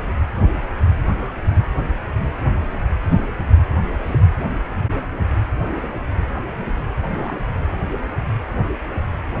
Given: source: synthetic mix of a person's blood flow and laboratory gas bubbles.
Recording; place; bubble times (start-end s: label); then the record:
Doppler ultrasound of blood flow; precordium
4.06-4.19 s: bubbles
5.64-5.82 s: bubbles
7.20-7.37 s: bubbles
From the record:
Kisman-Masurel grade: 121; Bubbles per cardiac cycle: 1 to 2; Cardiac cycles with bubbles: 10 to 50%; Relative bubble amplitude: barely perceptible (0.100 to 0.250); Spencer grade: 2 (many but less than half of the cardiac periods contain bubble signals, singularly or in groups); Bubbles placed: anywhere in the cardiac cycle